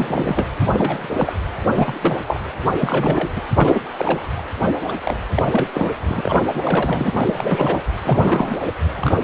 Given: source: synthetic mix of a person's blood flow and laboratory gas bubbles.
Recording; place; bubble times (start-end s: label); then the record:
Doppler ultrasound of blood flow; precordium
0.00-0.47 s: bubbles
0.72-1.33 s: bubbles
1.75-2.17 s: bubbles
2.27-2.41 s: bubbles
2.80-3.29 s: bubbles
3.35-3.42 s: bubbles
3.54-3.83 s: bubbles
3.98-4.42 s: bubbles
4.88-4.94 s: bubbles
5.04-5.19 s: bubbles
5.34-5.42 s: bubbles
5.46-6.03 s: bubbles
6.08-6.40 s: bubbles
6.54-7.82 s: bubbles
8.04-8.59 s: bubbles
8.96-9.14 s: bubbles
From the record:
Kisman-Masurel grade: 343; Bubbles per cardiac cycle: rolling drumbeat, 9 or more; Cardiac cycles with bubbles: 100%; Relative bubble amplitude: loud (0.450 to 0.775); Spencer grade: 3 (all of the cardiac periods contain showers or single bubble signals, but not dominating or overriding the cardiac motion signals); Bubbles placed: anywhere in the cardiac cycle